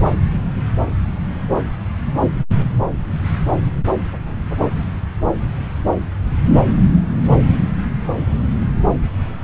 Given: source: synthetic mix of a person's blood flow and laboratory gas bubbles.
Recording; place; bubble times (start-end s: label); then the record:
Doppler ultrasound of blood flow; subclavian vein
no bubbles
From the record:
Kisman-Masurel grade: 000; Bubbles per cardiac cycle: 0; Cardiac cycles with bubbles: 0%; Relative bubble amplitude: no bubbles discernible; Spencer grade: 0 (complete lack of bubble signals)